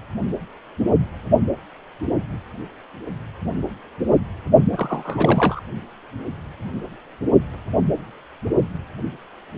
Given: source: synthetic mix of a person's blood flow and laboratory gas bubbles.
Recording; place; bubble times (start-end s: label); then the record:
Doppler ultrasound of blood flow; precordium
4.72-5.61 s: bubbles
From the record:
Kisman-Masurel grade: 222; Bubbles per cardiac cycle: several, 3 to 8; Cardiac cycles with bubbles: 10 to 50%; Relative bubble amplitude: moderate (0.250 to 0.450); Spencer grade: 2 (many but less than half of the cardiac periods contain bubble signals, singularly or in groups); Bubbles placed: only in the low amplitude regions of the cardiac cycle